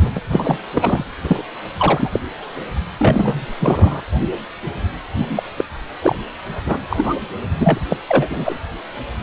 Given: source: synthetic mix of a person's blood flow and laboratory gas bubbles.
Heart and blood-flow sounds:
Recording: Doppler ultrasound of blood flow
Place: precordium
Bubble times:
0.00-0.12 s: bubbles
0.15-0.21 s: bubbles
0.31-0.58 s: bubbles
0.74-1.03 s: bubbles
1.21-1.43 s: bubbles
1.78-2.20 s: bubbles
2.99-3.46 s: bubbles
3.60-4.02 s: bubbles
5.14-5.43 s: bubbles
5.56-5.64 s: bubbles
6.01-6.15 s: bubbles
6.66-6.78 s: bubbles
6.89-7.14 s: bubbles
7.59-7.79 s: bubbles
7.89-7.97 s: bubbles
8.07-8.59 s: bubbles
From the record:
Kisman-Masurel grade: 233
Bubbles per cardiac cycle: several, 3 to 8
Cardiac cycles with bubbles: 50 to 99%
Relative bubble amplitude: loud (0.450 to 0.775)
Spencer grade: 3 (all of the cardiac periods contain showers or single bubble signals, but not dominating or overriding the cardiac motion signals)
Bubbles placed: anywhere in the cardiac cycle

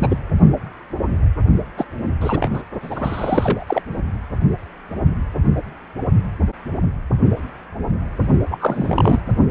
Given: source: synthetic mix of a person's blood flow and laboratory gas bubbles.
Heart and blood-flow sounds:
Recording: Doppler ultrasound of blood flow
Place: precordium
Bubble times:
0.00-0.18 s: bubbles
1.77-1.85 s: bubbles
2.21-2.51 s: bubbles
2.54-2.62 s: bubbles
2.82-3.82 s: bubbles
8.51-9.20 s: bubbles
From the record:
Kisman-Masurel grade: 222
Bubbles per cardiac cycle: several, 3 to 8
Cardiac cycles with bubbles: 10 to 50%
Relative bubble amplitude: moderate (0.250 to 0.450)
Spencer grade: 2 (many but less than half of the cardiac periods contain bubble signals, singularly or in groups)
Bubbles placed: only in the low amplitude regions of the cardiac cycle

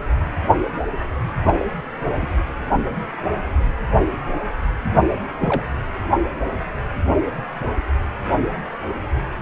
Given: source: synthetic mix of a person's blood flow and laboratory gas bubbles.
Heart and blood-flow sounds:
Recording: Doppler ultrasound of blood flow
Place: precordium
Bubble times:
1.43-1.65 s: bubbles
2.21-2.27 s: bubbles
5.39-5.63 s: bubbles
From the record:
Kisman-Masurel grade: 122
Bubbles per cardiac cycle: 1 to 2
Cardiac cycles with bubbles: 10 to 50%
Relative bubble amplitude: moderate (0.250 to 0.450)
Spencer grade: 2 (many but less than half of the cardiac periods contain bubble signals, singularly or in groups)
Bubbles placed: anywhere in the cardiac cycle

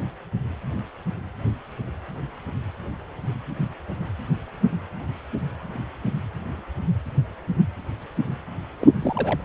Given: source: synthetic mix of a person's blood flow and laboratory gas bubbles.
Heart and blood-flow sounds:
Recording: Doppler ultrasound of blood flow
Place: precordium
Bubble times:
8.80-8.91 s: bubbles
9.01-9.41 s: bubbles
From the record:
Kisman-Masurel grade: 211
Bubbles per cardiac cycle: several, 3 to 8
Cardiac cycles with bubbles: 1 to 10%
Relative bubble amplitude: barely perceptible (0.100 to 0.250)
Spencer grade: 1 (occasional bubble signal discernible with the cardiac motion signal, with majority of cardiac periods free of bubbles)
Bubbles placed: anywhere in the cardiac cycle

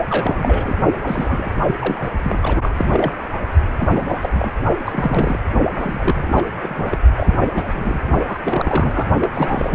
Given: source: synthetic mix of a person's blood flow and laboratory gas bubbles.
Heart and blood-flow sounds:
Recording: Doppler ultrasound of blood flow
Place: precordium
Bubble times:
0.07-0.77 s: bubbles
1.06-1.49 s: bubbles
1.66-2.10 s: bubbles
2.23-2.58 s: bubbles
2.61-3.11 s: bubbles
3.78-4.04 s: bubbles
4.09-4.19 s: bubbles
4.22-4.29 s: bubbles
4.34-4.52 s: bubbles
4.85-5.39 s: bubbles
5.79-6.99 s: bubbles
7.17-7.38 s: bubbles
7.55-7.64 s: bubbles
7.74-8.01 s: bubbles
8.27-8.40 s: bubbles
8.44-9.07 s: bubbles
9.21-9.31 s: bubbles
9.34-9.75 s: bubbles
From the record:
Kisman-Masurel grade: 342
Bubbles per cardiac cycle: rolling drumbeat, 9 or more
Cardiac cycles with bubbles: 100%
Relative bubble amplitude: moderate (0.250 to 0.450)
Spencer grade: 3 (all of the cardiac periods contain showers or single bubble signals, but not dominating or overriding the cardiac motion signals)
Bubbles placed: only in the low amplitude regions of the cardiac cycle

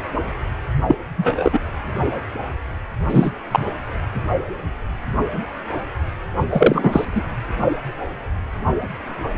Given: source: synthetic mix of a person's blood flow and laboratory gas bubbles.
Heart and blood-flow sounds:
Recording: Doppler ultrasound of blood flow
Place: precordium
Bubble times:
0.88-0.95 s: bubbles
1.17-1.60 s: bubbles
3.09-3.32 s: bubbles
3.51-3.65 s: bubbles
6.50-7.05 s: bubbles
7.14-7.22 s: bubbles
From the record:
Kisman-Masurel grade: 223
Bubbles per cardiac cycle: several, 3 to 8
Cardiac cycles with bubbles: 10 to 50%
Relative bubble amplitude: loud (0.450 to 0.775)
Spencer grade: 2 (many but less than half of the cardiac periods contain bubble signals, singularly or in groups)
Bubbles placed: anywhere in the cardiac cycle

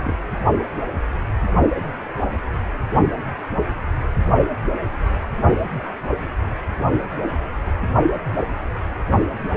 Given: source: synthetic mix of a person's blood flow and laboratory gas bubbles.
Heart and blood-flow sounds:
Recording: Doppler ultrasound of blood flow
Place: precordium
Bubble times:
0.06-0.15 s: bubbles
From the record:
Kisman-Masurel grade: 211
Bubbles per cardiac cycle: several, 3 to 8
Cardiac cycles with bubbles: 1 to 10%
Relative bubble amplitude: barely perceptible (0.100 to 0.250)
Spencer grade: 1 (occasional bubble signal discernible with the cardiac motion signal, with majority of cardiac periods free of bubbles)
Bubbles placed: only in the low amplitude regions of the cardiac cycle

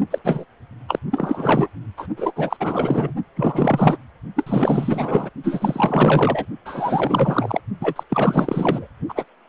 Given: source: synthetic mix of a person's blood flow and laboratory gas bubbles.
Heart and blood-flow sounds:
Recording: Doppler ultrasound of blood flow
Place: precordium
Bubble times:
0.10-0.18 s: bubbles
0.24-0.45 s: bubbles
0.88-0.99 s: bubbles
1.10-1.69 s: bubbles
1.97-2.07 s: bubbles
2.17-2.32 s: bubbles
2.35-2.56 s: bubbles
2.60-3.15 s: bubbles
3.36-3.98 s: bubbles
4.36-5.29 s: bubbles
5.43-6.46 s: bubbles
6.65-7.60 s: bubbles
7.80-8.04 s: bubbles
8.10-8.88 s: bubbles
9.08-9.24 s: bubbles
From the record:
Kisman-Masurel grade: 444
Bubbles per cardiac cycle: continuous sound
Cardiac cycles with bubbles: 100%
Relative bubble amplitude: maximal (0.775 to 0.999)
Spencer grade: 4 (maximum detectable bubble signal sounding continuously throughout systole and diastole of every cardiac period, and overriding the amplitude of the normal cardiac signals)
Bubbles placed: only in the low amplitude regions of the cardiac cycle

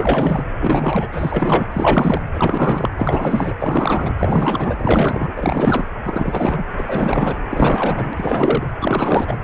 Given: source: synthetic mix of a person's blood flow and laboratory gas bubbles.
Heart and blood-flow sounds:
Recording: Doppler ultrasound of blood flow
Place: precordium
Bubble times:
0.00-0.44 s: bubbles
0.60-1.08 s: bubbles
1.12-1.67 s: bubbles
1.71-2.22 s: bubbles
2.34-2.94 s: bubbles
2.98-3.54 s: bubbles
3.59-4.13 s: bubbles
4.18-5.32 s: bubbles
5.36-5.85 s: bubbles
6.04-6.65 s: bubbles
6.77-7.37 s: bubbles
7.49-8.13 s: bubbles
8.17-8.66 s: bubbles
8.80-9.38 s: bubbles
From the record:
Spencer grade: 4 (maximum detectable bubble signal sounding continuously throughout systole and diastole of every cardiac period, and overriding the amplitude of the normal cardiac signals)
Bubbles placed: anywhere in the cardiac cycle

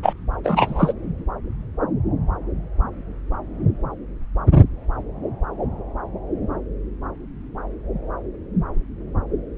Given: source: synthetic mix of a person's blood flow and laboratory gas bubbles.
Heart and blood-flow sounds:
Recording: Doppler ultrasound of blood flow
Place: subclavian vein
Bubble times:
0.02-0.13 s: bubbles
0.44-0.93 s: bubbles
From the record:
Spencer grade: 1 (occasional bubble signal discernible with the cardiac motion signal, with majority of cardiac periods free of bubbles)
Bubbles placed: anywhere in the cardiac cycle

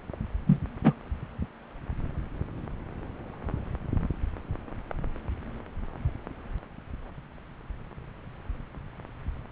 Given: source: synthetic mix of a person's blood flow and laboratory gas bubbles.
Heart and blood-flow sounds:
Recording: Doppler ultrasound of blood flow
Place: subclavian vein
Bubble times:
0.46-0.59 s: bubbles
0.83-0.93 s: bubbles
From the record:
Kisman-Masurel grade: 113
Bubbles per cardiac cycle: 1 to 2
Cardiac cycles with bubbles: 1 to 10%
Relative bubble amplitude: loud (0.450 to 0.775)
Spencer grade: 1 (occasional bubble signal discernible with the cardiac motion signal, with majority of cardiac periods free of bubbles)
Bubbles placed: anywhere in the cardiac cycle

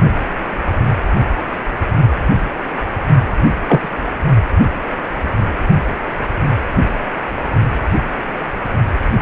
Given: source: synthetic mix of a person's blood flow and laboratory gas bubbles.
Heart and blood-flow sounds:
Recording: Doppler ultrasound of blood flow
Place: precordium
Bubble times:
3.67-3.89 s: bubbles
From the record:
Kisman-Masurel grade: 123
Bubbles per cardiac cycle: 1 to 2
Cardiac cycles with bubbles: 10 to 50%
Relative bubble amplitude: loud (0.450 to 0.775)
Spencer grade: 2 (many but less than half of the cardiac periods contain bubble signals, singularly or in groups)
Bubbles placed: only in the low amplitude regions of the cardiac cycle

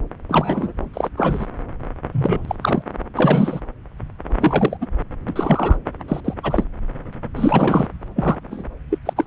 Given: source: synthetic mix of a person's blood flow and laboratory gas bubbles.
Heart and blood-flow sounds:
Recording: Doppler ultrasound of blood flow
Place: subclavian vein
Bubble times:
0.29-0.73 s: bubbles
0.94-1.09 s: bubbles
1.17-1.47 s: bubbles
2.11-2.55 s: bubbles
2.61-2.82 s: bubbles
3.15-3.60 s: bubbles
4.39-4.77 s: bubbles
4.81-4.86 s: bubbles
5.29-5.79 s: bubbles
6.08-6.21 s: bubbles
6.25-6.34 s: bubbles
6.43-6.64 s: bubbles
7.35-7.87 s: bubbles
8.16-8.64 s: bubbles
8.90-8.99 s: bubbles
9.06-9.13 s: bubbles
9.16-9.25 s: bubbles
From the record:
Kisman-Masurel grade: 232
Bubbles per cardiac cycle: several, 3 to 8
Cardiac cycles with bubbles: 50 to 99%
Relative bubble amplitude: moderate (0.250 to 0.450)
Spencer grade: 3 (all of the cardiac periods contain showers or single bubble signals, but not dominating or overriding the cardiac motion signals)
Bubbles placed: anywhere in the cardiac cycle

